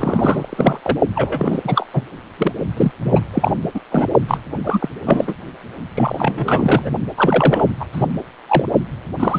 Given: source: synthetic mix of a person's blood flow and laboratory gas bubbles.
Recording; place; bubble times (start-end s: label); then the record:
Doppler ultrasound of blood flow; precordium
0.00-0.81 s: bubbles
0.84-0.98 s: bubbles
1.15-1.87 s: bubbles
1.93-2.02 s: bubbles
2.38-2.52 s: bubbles
2.77-2.92 s: bubbles
3.01-3.23 s: bubbles
3.33-3.52 s: bubbles
3.74-3.80 s: bubbles
3.91-4.07 s: bubbles
4.28-4.38 s: bubbles
4.63-4.88 s: bubbles
5.05-5.35 s: bubbles
5.94-6.90 s: bubbles
7.17-7.66 s: bubbles
7.79-7.85 s: bubbles
7.92-8.07 s: bubbles
8.48-8.66 s: bubbles
9.20-9.39 s: bubbles
From the record:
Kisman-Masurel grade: 333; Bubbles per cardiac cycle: rolling drumbeat, 9 or more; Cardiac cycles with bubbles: 50 to 99%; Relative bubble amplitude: loud (0.450 to 0.775); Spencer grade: 3 (all of the cardiac periods contain showers or single bubble signals, but not dominating or overriding the cardiac motion signals); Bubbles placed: only in the low amplitude regions of the cardiac cycle